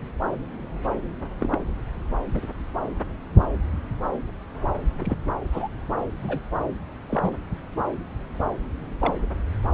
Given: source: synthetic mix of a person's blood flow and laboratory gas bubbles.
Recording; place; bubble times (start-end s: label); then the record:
Doppler ultrasound of blood flow; subclavian vein
1.40-1.49 s: bubbles
1.52-1.58 s: bubbles
2.33-2.46 s: bubbles
5.00-5.16 s: bubbles
5.53-5.68 s: bubbles
6.22-6.41 s: bubbles
7.09-7.33 s: bubbles
9.00-9.14 s: bubbles
From the record:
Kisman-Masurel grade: 121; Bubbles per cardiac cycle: 1 to 2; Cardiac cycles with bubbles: 10 to 50%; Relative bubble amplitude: barely perceptible (0.100 to 0.250); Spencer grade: 2 (many but less than half of the cardiac periods contain bubble signals, singularly or in groups); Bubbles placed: anywhere in the cardiac cycle